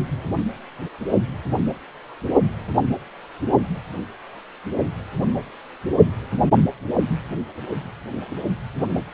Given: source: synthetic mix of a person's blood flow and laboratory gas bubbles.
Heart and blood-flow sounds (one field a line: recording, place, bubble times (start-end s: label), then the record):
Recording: Doppler ultrasound of blood flow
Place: precordium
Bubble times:
no bubbles
From the record:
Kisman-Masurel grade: 000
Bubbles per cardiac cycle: 0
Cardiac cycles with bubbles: 0%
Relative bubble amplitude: no bubbles discernible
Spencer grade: 0 (complete lack of bubble signals)